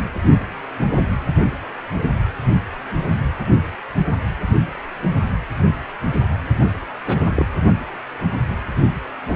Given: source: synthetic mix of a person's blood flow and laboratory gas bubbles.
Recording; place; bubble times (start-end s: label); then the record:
Doppler ultrasound of blood flow; precordium
7.06-7.45 s: bubbles
From the record:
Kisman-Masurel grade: 112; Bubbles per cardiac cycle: 1 to 2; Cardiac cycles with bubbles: 1 to 10%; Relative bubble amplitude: moderate (0.250 to 0.450); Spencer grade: 1 (occasional bubble signal discernible with the cardiac motion signal, with majority of cardiac periods free of bubbles); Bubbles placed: anywhere in the cardiac cycle